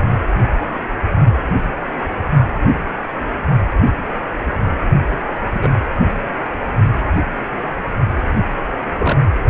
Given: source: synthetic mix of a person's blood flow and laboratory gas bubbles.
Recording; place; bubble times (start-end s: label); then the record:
Doppler ultrasound of blood flow; precordium
5.54-5.75 s: bubbles
8.99-9.19 s: bubbles
From the record:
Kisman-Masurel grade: 122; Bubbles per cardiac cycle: 1 to 2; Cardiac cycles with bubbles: 10 to 50%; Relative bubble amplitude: moderate (0.250 to 0.450); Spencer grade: 2 (many but less than half of the cardiac periods contain bubble signals, singularly or in groups); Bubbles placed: anywhere in the cardiac cycle